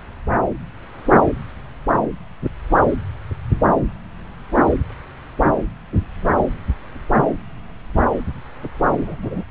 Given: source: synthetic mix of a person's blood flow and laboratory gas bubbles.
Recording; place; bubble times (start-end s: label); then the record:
Doppler ultrasound of blood flow; subclavian vein
9.04-9.17 s: bubbles
9.22-9.27 s: bubbles
9.30-9.43 s: bubbles
From the record:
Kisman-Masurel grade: 222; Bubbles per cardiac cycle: several, 3 to 8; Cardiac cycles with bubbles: 10 to 50%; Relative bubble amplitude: moderate (0.250 to 0.450); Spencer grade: 2 (many but less than half of the cardiac periods contain bubble signals, singularly or in groups); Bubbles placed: anywhere in the cardiac cycle